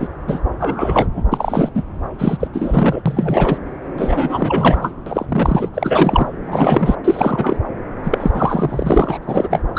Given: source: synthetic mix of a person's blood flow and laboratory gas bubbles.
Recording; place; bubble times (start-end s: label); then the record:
Doppler ultrasound of blood flow; subclavian vein
0.00-0.09 s: bubbles
0.27-0.41 s: bubbles
0.59-1.07 s: bubbles
1.15-1.23 s: bubbles
1.32-1.70 s: bubbles
1.74-1.84 s: bubbles
2.19-2.47 s: bubbles
2.53-3.02 s: bubbles
3.05-3.58 s: bubbles
3.98-4.92 s: bubbles
5.06-5.26 s: bubbles
5.29-5.70 s: bubbles
5.74-6.28 s: bubbles
6.46-6.95 s: bubbles
7.04-7.57 s: bubbles
8.04-9.18 s: bubbles
9.22-9.62 s: bubbles
9.75-9.79 s: bubbles
From the record:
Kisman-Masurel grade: 343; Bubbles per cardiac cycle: rolling drumbeat, 9 or more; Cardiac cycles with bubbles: 100%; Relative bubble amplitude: loud (0.450 to 0.775); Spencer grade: 3 (all of the cardiac periods contain showers or single bubble signals, but not dominating or overriding the cardiac motion signals); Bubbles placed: anywhere in the cardiac cycle